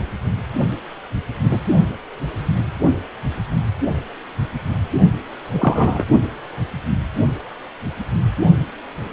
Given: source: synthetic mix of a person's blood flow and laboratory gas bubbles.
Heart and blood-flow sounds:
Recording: Doppler ultrasound of blood flow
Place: precordium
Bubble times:
1.50-1.58 s: bubbles
5.53-6.04 s: bubbles
From the record:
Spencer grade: 2 (many but less than half of the cardiac periods contain bubble signals, singularly or in groups)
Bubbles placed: only in the low amplitude regions of the cardiac cycle

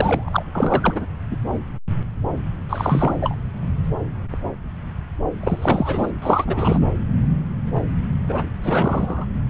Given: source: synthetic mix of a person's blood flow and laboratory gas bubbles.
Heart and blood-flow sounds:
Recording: Doppler ultrasound of blood flow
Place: subclavian vein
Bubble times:
0.00-0.43 s: bubbles
0.55-1.06 s: bubbles
1.30-1.38 s: bubbles
2.69-3.36 s: bubbles
5.43-6.11 s: bubbles
6.21-6.79 s: bubbles
8.28-8.49 s: bubbles
8.63-9.26 s: bubbles
From the record:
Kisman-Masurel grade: 333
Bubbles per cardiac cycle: rolling drumbeat, 9 or more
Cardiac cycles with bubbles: 50 to 99%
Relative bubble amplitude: loud (0.450 to 0.775)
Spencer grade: 3 (all of the cardiac periods contain showers or single bubble signals, but not dominating or overriding the cardiac motion signals)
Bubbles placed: anywhere in the cardiac cycle

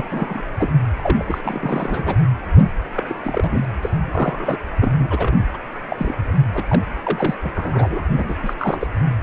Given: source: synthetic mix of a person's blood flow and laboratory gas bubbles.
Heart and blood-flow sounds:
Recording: Doppler ultrasound of blood flow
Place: precordium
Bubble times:
0.00-0.07 s: bubbles
0.12-0.42 s: bubbles
0.59-0.74 s: bubbles
0.98-1.24 s: bubbles
1.27-1.41 s: bubbles
1.44-2.15 s: bubbles
2.93-3.04 s: bubbles
3.06-3.65 s: bubbles
3.82-3.91 s: bubbles
4.12-4.58 s: bubbles
4.81-4.92 s: bubbles
4.99-5.45 s: bubbles
5.54-5.57 s: bubbles
5.90-6.15 s: bubbles
6.54-6.63 s: bubbles
6.69-6.81 s: bubbles
7.03-7.34 s: bubbles
7.42-7.50 s: bubbles
7.55-8.02 s: bubbles
8.12-8.36 s: bubbles
8.42-8.54 s: bubbles
8.57-8.88 s: bubbles
From the record:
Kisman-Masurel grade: 242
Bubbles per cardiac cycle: several, 3 to 8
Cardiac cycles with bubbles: 100%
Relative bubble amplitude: moderate (0.250 to 0.450)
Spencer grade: 3 (all of the cardiac periods contain showers or single bubble signals, but not dominating or overriding the cardiac motion signals)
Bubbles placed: anywhere in the cardiac cycle

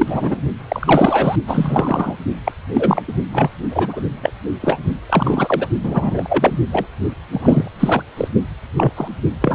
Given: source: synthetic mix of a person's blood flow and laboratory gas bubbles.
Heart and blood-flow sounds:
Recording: Doppler ultrasound of blood flow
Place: precordium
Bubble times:
0.00-0.40 s: bubbles
0.68-1.36 s: bubbles
1.47-2.15 s: bubbles
2.45-2.52 s: bubbles
2.74-3.02 s: bubbles
3.08-3.13 s: bubbles
3.32-3.50 s: bubbles
3.71-4.00 s: bubbles
4.23-4.32 s: bubbles
4.60-4.79 s: bubbles
5.09-5.68 s: bubbles
5.83-6.60 s: bubbles
6.72-6.87 s: bubbles
7.32-7.69 s: bubbles
7.79-8.03 s: bubbles
8.17-8.28 s: bubbles
8.76-8.93 s: bubbles
8.96-9.08 s: bubbles
9.41-9.55 s: bubbles
From the record:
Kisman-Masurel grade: 243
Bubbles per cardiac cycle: several, 3 to 8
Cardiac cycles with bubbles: 100%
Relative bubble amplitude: loud (0.450 to 0.775)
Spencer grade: 3 (all of the cardiac periods contain showers or single bubble signals, but not dominating or overriding the cardiac motion signals)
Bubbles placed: only in the low amplitude regions of the cardiac cycle

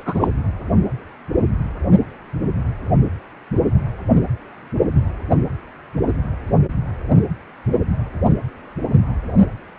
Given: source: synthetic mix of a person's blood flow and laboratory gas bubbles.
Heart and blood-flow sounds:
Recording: Doppler ultrasound of blood flow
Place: precordium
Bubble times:
0.00-0.29 s: bubbles
From the record:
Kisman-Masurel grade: 212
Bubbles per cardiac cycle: several, 3 to 8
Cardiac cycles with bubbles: 1 to 10%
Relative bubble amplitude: moderate (0.250 to 0.450)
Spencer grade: 1 (occasional bubble signal discernible with the cardiac motion signal, with majority of cardiac periods free of bubbles)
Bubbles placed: anywhere in the cardiac cycle

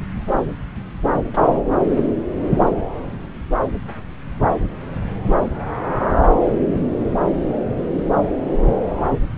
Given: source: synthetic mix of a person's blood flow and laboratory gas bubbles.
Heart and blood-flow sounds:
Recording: Doppler ultrasound of blood flow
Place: subclavian vein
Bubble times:
1.33-1.61 s: bubbles
1.88-2.02 s: bubbles
From the record:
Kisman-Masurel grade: 211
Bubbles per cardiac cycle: several, 3 to 8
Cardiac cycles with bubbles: 1 to 10%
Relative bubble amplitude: barely perceptible (0.100 to 0.250)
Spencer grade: 1 (occasional bubble signal discernible with the cardiac motion signal, with majority of cardiac periods free of bubbles)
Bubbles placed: anywhere in the cardiac cycle

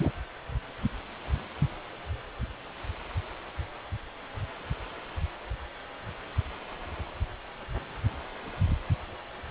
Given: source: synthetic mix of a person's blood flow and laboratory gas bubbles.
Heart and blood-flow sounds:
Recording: Doppler ultrasound of blood flow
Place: precordium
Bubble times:
0.00-0.12 s: bubbles
From the record:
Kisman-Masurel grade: 212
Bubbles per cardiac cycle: several, 3 to 8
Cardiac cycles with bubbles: 1 to 10%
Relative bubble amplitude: moderate (0.250 to 0.450)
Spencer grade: 1 (occasional bubble signal discernible with the cardiac motion signal, with majority of cardiac periods free of bubbles)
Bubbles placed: anywhere in the cardiac cycle

